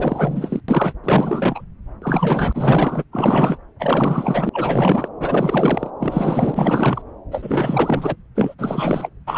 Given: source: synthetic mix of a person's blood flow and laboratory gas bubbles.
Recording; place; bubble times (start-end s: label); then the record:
Doppler ultrasound of blood flow; subclavian vein
0.00-0.60 s: bubbles
0.68-0.93 s: bubbles
1.04-1.62 s: bubbles
2.02-3.04 s: bubbles
3.12-3.58 s: bubbles
3.79-4.49 s: bubbles
4.52-5.08 s: bubbles
5.20-5.90 s: bubbles
5.99-7.02 s: bubbles
7.31-8.16 s: bubbles
8.35-8.54 s: bubbles
8.58-9.09 s: bubbles
9.27-9.38 s: bubbles
From the record:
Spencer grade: 4 (maximum detectable bubble signal sounding continuously throughout systole and diastole of every cardiac period, and overriding the amplitude of the normal cardiac signals); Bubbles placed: anywhere in the cardiac cycle